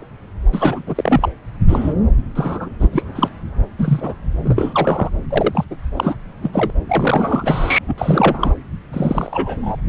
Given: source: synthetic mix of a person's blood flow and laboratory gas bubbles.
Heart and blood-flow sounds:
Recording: Doppler ultrasound of blood flow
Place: subclavian vein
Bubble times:
0.00-0.07 s: bubbles
0.51-0.82 s: bubbles
0.87-1.29 s: bubbles
1.68-1.93 s: bubbles
2.35-2.70 s: bubbles
2.80-2.89 s: bubbles
2.93-3.03 s: bubbles
3.15-3.29 s: bubbles
3.79-4.13 s: bubbles
4.44-5.09 s: bubbles
5.30-5.64 s: bubbles
5.71-5.76 s: bubbles
5.96-6.15 s: bubbles
6.42-6.50 s: bubbles
6.52-6.71 s: bubbles
6.89-7.79 s: bubbles
7.88-7.95 s: bubbles
7.97-8.54 s: bubbles
8.93-9.76 s: bubbles
From the record:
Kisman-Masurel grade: 243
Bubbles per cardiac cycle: several, 3 to 8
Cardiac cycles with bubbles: 100%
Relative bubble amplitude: loud (0.450 to 0.775)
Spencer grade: 3 (all of the cardiac periods contain showers or single bubble signals, but not dominating or overriding the cardiac motion signals)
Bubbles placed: anywhere in the cardiac cycle

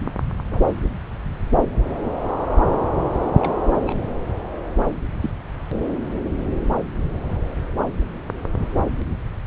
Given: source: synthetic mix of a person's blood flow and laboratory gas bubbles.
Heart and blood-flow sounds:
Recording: Doppler ultrasound of blood flow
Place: subclavian vein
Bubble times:
0.51-0.61 s: bubbles
3.39-3.53 s: bubbles
3.85-3.98 s: bubbles
5.21-5.31 s: bubbles
8.57-8.67 s: bubbles
From the record:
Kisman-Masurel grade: 121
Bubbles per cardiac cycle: 1 to 2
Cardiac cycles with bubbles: 10 to 50%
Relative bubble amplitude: barely perceptible (0.100 to 0.250)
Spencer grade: 2 (many but less than half of the cardiac periods contain bubble signals, singularly or in groups)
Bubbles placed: anywhere in the cardiac cycle

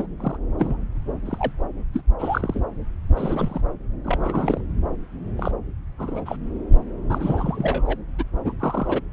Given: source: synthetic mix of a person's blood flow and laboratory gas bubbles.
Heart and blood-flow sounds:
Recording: Doppler ultrasound of blood flow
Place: subclavian vein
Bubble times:
0.00-0.07 s: bubbles
0.20-0.37 s: bubbles
0.58-0.84 s: bubbles
1.25-1.53 s: bubbles
1.94-2.01 s: bubbles
2.19-2.62 s: bubbles
3.17-3.61 s: bubbles
4.04-4.61 s: bubbles
5.38-5.52 s: bubbles
5.99-6.37 s: bubbles
7.09-7.97 s: bubbles
8.19-8.23 s: bubbles
8.45-8.53 s: bubbles
8.60-9.01 s: bubbles
From the record:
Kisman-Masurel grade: 242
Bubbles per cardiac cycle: several, 3 to 8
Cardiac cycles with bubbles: 100%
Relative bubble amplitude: moderate (0.250 to 0.450)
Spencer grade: 3 (all of the cardiac periods contain showers or single bubble signals, but not dominating or overriding the cardiac motion signals)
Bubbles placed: anywhere in the cardiac cycle

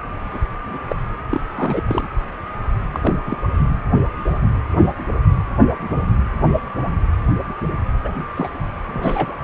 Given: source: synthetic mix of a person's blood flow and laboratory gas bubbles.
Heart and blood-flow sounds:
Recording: Doppler ultrasound of blood flow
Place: precordium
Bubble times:
0.33-0.39 s: bubbles
0.69-0.78 s: bubbles
0.88-0.95 s: bubbles
1.30-1.41 s: bubbles
1.57-1.83 s: bubbles
1.88-2.08 s: bubbles
2.92-3.17 s: bubbles
3.26-3.37 s: bubbles
8.04-8.12 s: bubbles
8.36-8.49 s: bubbles
8.93-9.34 s: bubbles
From the record:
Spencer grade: 2 (many but less than half of the cardiac periods contain bubble signals, singularly or in groups)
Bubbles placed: anywhere in the cardiac cycle

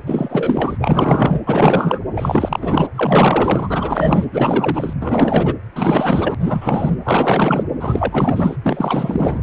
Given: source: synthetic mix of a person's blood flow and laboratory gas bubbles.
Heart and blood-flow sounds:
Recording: Doppler ultrasound of blood flow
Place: precordium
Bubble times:
0.06-1.41 s: bubbles
1.46-1.99 s: bubbles
2.16-2.88 s: bubbles
2.94-4.29 s: bubbles
4.32-4.93 s: bubbles
5.00-5.54 s: bubbles
5.75-6.35 s: bubbles
6.39-6.96 s: bubbles
7.04-7.64 s: bubbles
7.80-8.56 s: bubbles
8.63-9.41 s: bubbles
From the record:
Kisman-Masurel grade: 444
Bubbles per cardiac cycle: continuous sound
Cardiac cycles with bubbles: 100%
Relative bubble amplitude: maximal (0.775 to 0.999)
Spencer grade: 4 (maximum detectable bubble signal sounding continuously throughout systole and diastole of every cardiac period, and overriding the amplitude of the normal cardiac signals)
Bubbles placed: anywhere in the cardiac cycle

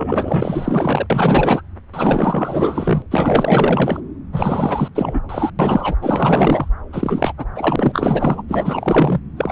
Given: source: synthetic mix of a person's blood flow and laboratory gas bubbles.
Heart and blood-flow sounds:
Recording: Doppler ultrasound of blood flow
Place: subclavian vein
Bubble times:
0.00-1.06 s: bubbles
1.10-1.61 s: bubbles
1.92-3.02 s: bubbles
3.10-4.00 s: bubbles
4.32-4.88 s: bubbles
4.94-5.20 s: bubbles
5.29-5.50 s: bubbles
5.59-5.95 s: bubbles
6.01-6.68 s: bubbles
6.92-7.33 s: bubbles
7.38-7.45 s: bubbles
7.55-8.43 s: bubbles
8.47-9.20 s: bubbles
9.37-9.52 s: bubbles
From the record:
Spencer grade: 4 (maximum detectable bubble signal sounding continuously throughout systole and diastole of every cardiac period, and overriding the amplitude of the normal cardiac signals)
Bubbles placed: anywhere in the cardiac cycle

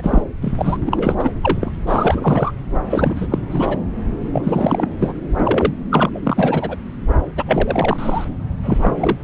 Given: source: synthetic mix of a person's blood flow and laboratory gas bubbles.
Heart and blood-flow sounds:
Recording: Doppler ultrasound of blood flow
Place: subclavian vein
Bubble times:
0.00-0.23 s: bubbles
0.41-0.77 s: bubbles
0.85-1.15 s: bubbles
1.18-1.29 s: bubbles
1.41-1.72 s: bubbles
1.87-2.52 s: bubbles
2.90-3.28 s: bubbles
3.30-3.39 s: bubbles
3.51-3.77 s: bubbles
4.32-4.86 s: bubbles
5.00-5.13 s: bubbles
5.39-5.75 s: bubbles
5.90-6.09 s: bubbles
6.14-6.19 s: bubbles
6.23-6.76 s: bubbles
7.36-7.43 s: bubbles
7.46-8.24 s: bubbles
8.63-8.91 s: bubbles
8.96-9.17 s: bubbles
From the record:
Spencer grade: 3 (all of the cardiac periods contain showers or single bubble signals, but not dominating or overriding the cardiac motion signals)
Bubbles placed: anywhere in the cardiac cycle

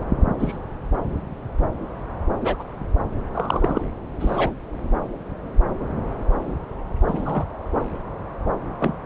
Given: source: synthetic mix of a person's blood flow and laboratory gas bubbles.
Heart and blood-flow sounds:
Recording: Doppler ultrasound of blood flow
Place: subclavian vein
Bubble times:
0.39-0.58 s: bubbles
2.40-2.55 s: bubbles
2.59-2.63 s: bubbles
3.34-3.81 s: bubbles
4.19-4.51 s: bubbles
7.08-7.44 s: bubbles
8.80-8.95 s: bubbles
From the record:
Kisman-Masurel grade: 122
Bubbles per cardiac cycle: 1 to 2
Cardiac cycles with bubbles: 10 to 50%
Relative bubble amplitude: moderate (0.250 to 0.450)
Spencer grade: 2 (many but less than half of the cardiac periods contain bubble signals, singularly or in groups)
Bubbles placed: anywhere in the cardiac cycle

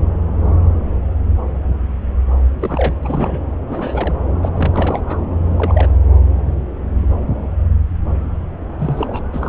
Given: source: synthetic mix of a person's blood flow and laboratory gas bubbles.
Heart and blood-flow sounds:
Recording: Doppler ultrasound of blood flow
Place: subclavian vein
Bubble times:
2.59-2.94 s: bubbles
3.03-3.44 s: bubbles
3.69-4.14 s: bubbles
4.42-4.49 s: bubbles
4.56-5.23 s: bubbles
5.43-5.87 s: bubbles
8.78-9.23 s: bubbles
9.33-9.49 s: bubbles
From the record:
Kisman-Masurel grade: 222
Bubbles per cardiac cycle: several, 3 to 8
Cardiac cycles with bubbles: 10 to 50%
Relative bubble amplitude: moderate (0.250 to 0.450)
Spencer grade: 2 (many but less than half of the cardiac periods contain bubble signals, singularly or in groups)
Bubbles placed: anywhere in the cardiac cycle

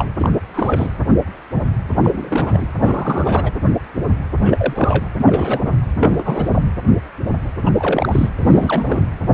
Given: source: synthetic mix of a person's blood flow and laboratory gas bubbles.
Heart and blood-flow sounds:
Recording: Doppler ultrasound of blood flow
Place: precordium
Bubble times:
0.00-0.07 s: bubbles
0.19-0.29 s: bubbles
0.54-0.92 s: bubbles
2.02-2.68 s: bubbles
2.77-3.52 s: bubbles
4.45-5.05 s: bubbles
5.18-5.62 s: bubbles
5.64-5.77 s: bubbles
5.99-6.49 s: bubbles
6.51-6.62 s: bubbles
7.64-7.71 s: bubbles
7.77-8.29 s: bubbles
8.40-9.17 s: bubbles
From the record:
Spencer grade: 3 (all of the cardiac periods contain showers or single bubble signals, but not dominating or overriding the cardiac motion signals)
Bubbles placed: anywhere in the cardiac cycle

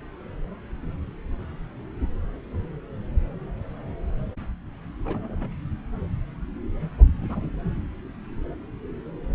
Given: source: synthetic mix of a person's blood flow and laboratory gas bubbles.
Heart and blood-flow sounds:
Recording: Doppler ultrasound of blood flow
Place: subclavian vein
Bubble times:
5.04-5.53 s: bubbles
7.20-7.26 s: bubbles
7.29-7.55 s: bubbles
From the record:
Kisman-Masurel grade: 121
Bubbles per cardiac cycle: 1 to 2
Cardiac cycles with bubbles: 10 to 50%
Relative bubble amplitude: barely perceptible (0.100 to 0.250)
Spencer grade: 2 (many but less than half of the cardiac periods contain bubble signals, singularly or in groups)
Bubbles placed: anywhere in the cardiac cycle

